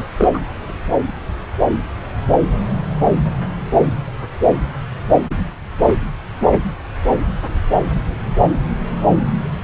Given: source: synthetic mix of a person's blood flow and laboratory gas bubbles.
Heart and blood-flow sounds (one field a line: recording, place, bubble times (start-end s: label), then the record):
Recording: Doppler ultrasound of blood flow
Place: subclavian vein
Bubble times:
0.00-0.05 s: bubbles
0.18-0.31 s: bubbles
0.33-0.40 s: bubbles
From the record:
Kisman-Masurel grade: 213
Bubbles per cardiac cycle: several, 3 to 8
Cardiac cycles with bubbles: 1 to 10%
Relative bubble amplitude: loud (0.450 to 0.775)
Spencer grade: 1 (occasional bubble signal discernible with the cardiac motion signal, with majority of cardiac periods free of bubbles)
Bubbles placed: anywhere in the cardiac cycle